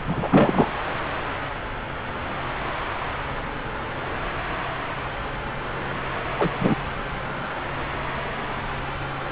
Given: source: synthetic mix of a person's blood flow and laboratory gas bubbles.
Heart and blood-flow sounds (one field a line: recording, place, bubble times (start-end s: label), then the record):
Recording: Doppler ultrasound of blood flow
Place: subclavian vein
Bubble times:
0.06-0.71 s: bubbles
6.38-6.50 s: bubbles
6.59-6.76 s: bubbles
From the record:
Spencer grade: 2 (many but less than half of the cardiac periods contain bubble signals, singularly or in groups)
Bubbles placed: anywhere in the cardiac cycle